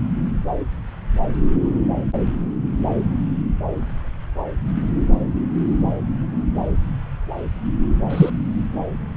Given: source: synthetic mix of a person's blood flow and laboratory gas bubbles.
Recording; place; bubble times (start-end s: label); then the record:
Doppler ultrasound of blood flow; subclavian vein
8.10-8.30 s: bubbles
From the record:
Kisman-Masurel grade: 113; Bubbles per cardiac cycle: 1 to 2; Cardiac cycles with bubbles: 1 to 10%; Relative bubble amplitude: loud (0.450 to 0.775); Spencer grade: 1 (occasional bubble signal discernible with the cardiac motion signal, with majority of cardiac periods free of bubbles); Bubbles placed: anywhere in the cardiac cycle